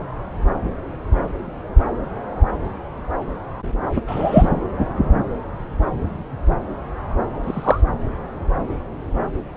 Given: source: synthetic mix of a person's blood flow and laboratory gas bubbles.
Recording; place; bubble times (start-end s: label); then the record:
Doppler ultrasound of blood flow; subclavian vein
4.07-4.49 s: bubbles
7.42-7.82 s: bubbles
From the record:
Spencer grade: 2 (many but less than half of the cardiac periods contain bubble signals, singularly or in groups); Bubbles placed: anywhere in the cardiac cycle